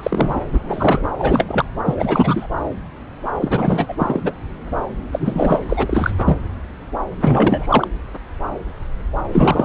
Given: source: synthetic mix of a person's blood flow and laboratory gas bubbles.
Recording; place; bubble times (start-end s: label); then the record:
Doppler ultrasound of blood flow; subclavian vein
0.00-0.41 s: bubbles
0.53-1.08 s: bubbles
1.18-1.65 s: bubbles
1.85-2.47 s: bubbles
3.40-3.94 s: bubbles
3.99-4.21 s: bubbles
4.24-4.33 s: bubbles
5.12-5.60 s: bubbles
5.69-6.37 s: bubbles
7.21-7.88 s: bubbles
9.32-9.65 s: bubbles
From the record:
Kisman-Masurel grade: 333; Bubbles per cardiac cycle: rolling drumbeat, 9 or more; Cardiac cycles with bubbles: 50 to 99%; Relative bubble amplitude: loud (0.450 to 0.775); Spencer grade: 3 (all of the cardiac periods contain showers or single bubble signals, but not dominating or overriding the cardiac motion signals); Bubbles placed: anywhere in the cardiac cycle